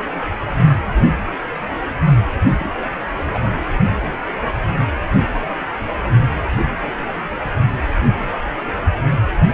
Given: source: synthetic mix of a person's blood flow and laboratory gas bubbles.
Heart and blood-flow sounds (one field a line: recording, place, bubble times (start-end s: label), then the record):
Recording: Doppler ultrasound of blood flow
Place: precordium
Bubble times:
2.47-2.52 s: bubbles
2.60-2.69 s: bubbles
3.15-3.56 s: bubbles
From the record:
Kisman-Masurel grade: 211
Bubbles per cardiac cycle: several, 3 to 8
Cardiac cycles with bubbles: 1 to 10%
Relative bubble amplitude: barely perceptible (0.100 to 0.250)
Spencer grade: 1 (occasional bubble signal discernible with the cardiac motion signal, with majority of cardiac periods free of bubbles)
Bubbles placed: anywhere in the cardiac cycle